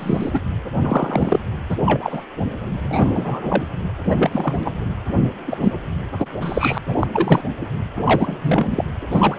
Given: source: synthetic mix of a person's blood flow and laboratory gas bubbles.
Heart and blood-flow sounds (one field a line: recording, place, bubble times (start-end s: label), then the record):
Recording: Doppler ultrasound of blood flow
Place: precordium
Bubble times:
0.00-0.30 s: bubbles
0.33-0.41 s: bubbles
0.81-1.40 s: bubbles
1.70-1.76 s: bubbles
1.85-2.25 s: bubbles
2.82-3.65 s: bubbles
4.05-4.71 s: bubbles
5.47-5.71 s: bubbles
6.18-6.28 s: bubbles
6.41-6.78 s: bubbles
6.88-6.96 s: bubbles
7.00-7.07 s: bubbles
7.12-7.42 s: bubbles
7.62-7.67 s: bubbles
8.05-8.38 s: bubbles
8.42-8.85 s: bubbles
9.12-9.39 s: bubbles
From the record:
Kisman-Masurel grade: 243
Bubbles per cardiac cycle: several, 3 to 8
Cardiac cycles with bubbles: 100%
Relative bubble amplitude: loud (0.450 to 0.775)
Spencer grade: 3 (all of the cardiac periods contain showers or single bubble signals, but not dominating or overriding the cardiac motion signals)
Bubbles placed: anywhere in the cardiac cycle